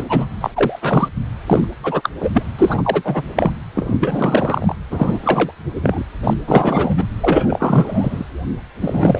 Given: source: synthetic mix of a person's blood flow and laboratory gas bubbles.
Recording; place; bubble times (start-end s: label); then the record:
Doppler ultrasound of blood flow; precordium
0.00-0.04 s: bubbles
0.08-0.26 s: bubbles
0.40-0.51 s: bubbles
0.54-0.79 s: bubbles
0.82-1.08 s: bubbles
1.47-1.68 s: bubbles
1.83-2.09 s: bubbles
2.20-2.30 s: bubbles
2.33-2.43 s: bubbles
2.58-3.22 s: bubbles
3.36-3.51 s: bubbles
3.74-4.75 s: bubbles
4.90-5.19 s: bubbles
5.22-5.53 s: bubbles
5.75-6.04 s: bubbles
6.24-6.34 s: bubbles
6.46-7.04 s: bubbles
7.20-8.25 s: bubbles
8.80-9.20 s: bubbles
From the record:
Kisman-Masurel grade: 333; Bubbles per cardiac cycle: rolling drumbeat, 9 or more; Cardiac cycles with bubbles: 50 to 99%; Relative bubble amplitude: loud (0.450 to 0.775); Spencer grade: 3 (all of the cardiac periods contain showers or single bubble signals, but not dominating or overriding the cardiac motion signals); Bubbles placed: anywhere in the cardiac cycle